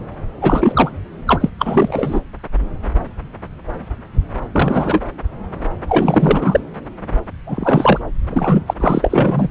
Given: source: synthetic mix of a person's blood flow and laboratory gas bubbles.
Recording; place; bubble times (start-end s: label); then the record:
Doppler ultrasound of blood flow; subclavian vein
0.42-0.92 s: bubbles
1.27-1.50 s: bubbles
1.58-2.20 s: bubbles
4.52-5.01 s: bubbles
5.88-6.61 s: bubbles
7.46-7.99 s: bubbles
8.30-8.63 s: bubbles
8.67-8.74 s: bubbles
8.80-9.48 s: bubbles
From the record:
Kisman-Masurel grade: 333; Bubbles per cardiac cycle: rolling drumbeat, 9 or more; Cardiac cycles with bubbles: 50 to 99%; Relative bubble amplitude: loud (0.450 to 0.775); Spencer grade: 3 (all of the cardiac periods contain showers or single bubble signals, but not dominating or overriding the cardiac motion signals); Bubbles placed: anywhere in the cardiac cycle